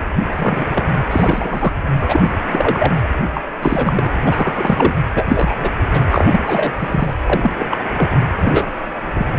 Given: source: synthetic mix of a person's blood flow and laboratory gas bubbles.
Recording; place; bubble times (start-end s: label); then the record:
Doppler ultrasound of blood flow; precordium
0.29-0.66 s: bubbles
0.73-0.83 s: bubbles
1.10-1.73 s: bubbles
2.00-2.30 s: bubbles
2.52-2.92 s: bubbles
3.34-3.44 s: bubbles
3.61-3.93 s: bubbles
3.96-4.07 s: bubbles
4.26-4.95 s: bubbles
5.15-5.24 s: bubbles
5.29-5.71 s: bubbles
5.93-6.01 s: bubbles
6.10-6.73 s: bubbles
6.79-7.13 s: bubbles
7.26-7.51 s: bubbles
7.58-7.77 s: bubbles
7.94-8.19 s: bubbles
8.41-8.68 s: bubbles
9.15-9.27 s: bubbles
From the record:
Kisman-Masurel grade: 243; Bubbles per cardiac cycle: several, 3 to 8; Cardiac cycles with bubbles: 100%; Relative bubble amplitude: loud (0.450 to 0.775); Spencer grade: 3 (all of the cardiac periods contain showers or single bubble signals, but not dominating or overriding the cardiac motion signals); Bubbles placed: anywhere in the cardiac cycle